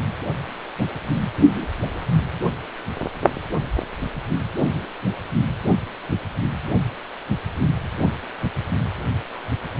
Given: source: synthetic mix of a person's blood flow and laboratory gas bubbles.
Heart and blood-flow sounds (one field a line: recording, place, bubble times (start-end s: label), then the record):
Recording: Doppler ultrasound of blood flow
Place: precordium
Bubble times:
no bubbles
From the record:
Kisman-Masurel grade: 000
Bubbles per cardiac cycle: 0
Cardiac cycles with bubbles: 0%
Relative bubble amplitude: no bubbles discernible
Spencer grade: 0 (complete lack of bubble signals)